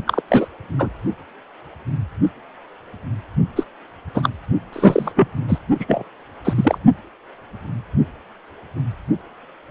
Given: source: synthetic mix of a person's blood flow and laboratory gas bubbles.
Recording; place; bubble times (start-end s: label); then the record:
Doppler ultrasound of blood flow; precordium
0.07-0.21 s: bubbles
0.28-0.48 s: bubbles
0.79-0.90 s: bubbles
3.56-3.65 s: bubbles
4.14-4.29 s: bubbles
4.72-5.12 s: bubbles
5.15-5.28 s: bubbles
5.48-5.58 s: bubbles
5.79-6.03 s: bubbles
6.44-6.78 s: bubbles
From the record:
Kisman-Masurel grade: 233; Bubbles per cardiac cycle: several, 3 to 8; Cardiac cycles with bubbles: 50 to 99%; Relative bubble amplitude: loud (0.450 to 0.775); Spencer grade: 3 (all of the cardiac periods contain showers or single bubble signals, but not dominating or overriding the cardiac motion signals); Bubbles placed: only in the low amplitude regions of the cardiac cycle